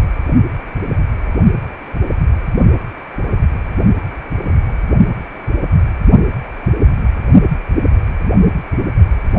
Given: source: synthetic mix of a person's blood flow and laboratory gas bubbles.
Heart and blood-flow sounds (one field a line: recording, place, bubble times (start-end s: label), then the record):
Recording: Doppler ultrasound of blood flow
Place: precordium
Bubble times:
4.48-4.54 s: bubbles
4.67-4.72 s: bubbles
From the record:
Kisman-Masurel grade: 111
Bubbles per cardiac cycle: 1 to 2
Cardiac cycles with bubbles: 1 to 10%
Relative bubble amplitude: barely perceptible (0.100 to 0.250)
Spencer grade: 1 (occasional bubble signal discernible with the cardiac motion signal, with majority of cardiac periods free of bubbles)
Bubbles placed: only in the low amplitude regions of the cardiac cycle